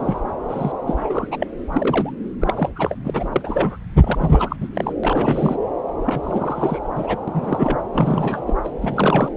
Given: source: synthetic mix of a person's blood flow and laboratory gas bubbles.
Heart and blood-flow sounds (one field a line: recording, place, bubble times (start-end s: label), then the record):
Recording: Doppler ultrasound of blood flow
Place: subclavian vein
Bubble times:
0.00-0.20 s: bubbles
0.48-0.72 s: bubbles
0.87-0.94 s: bubbles
0.98-1.27 s: bubbles
1.31-1.36 s: bubbles
1.40-1.47 s: bubbles
1.72-2.12 s: bubbles
2.41-2.69 s: bubbles
2.76-2.95 s: bubbles
3.04-3.10 s: bubbles
3.13-3.29 s: bubbles
3.32-3.77 s: bubbles
4.00-4.57 s: bubbles
4.61-4.68 s: bubbles
4.74-4.93 s: bubbles
5.04-5.56 s: bubbles
6.06-6.79 s: bubbles
6.95-7.20 s: bubbles
7.28-7.79 s: bubbles
7.93-8.45 s: bubbles
8.47-8.56 s: bubbles
8.64-8.70 s: bubbles
8.81-9.29 s: bubbles
From the record:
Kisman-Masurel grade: 342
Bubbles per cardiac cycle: rolling drumbeat, 9 or more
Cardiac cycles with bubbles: 100%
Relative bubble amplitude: moderate (0.250 to 0.450)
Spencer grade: 3 (all of the cardiac periods contain showers or single bubble signals, but not dominating or overriding the cardiac motion signals)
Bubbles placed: anywhere in the cardiac cycle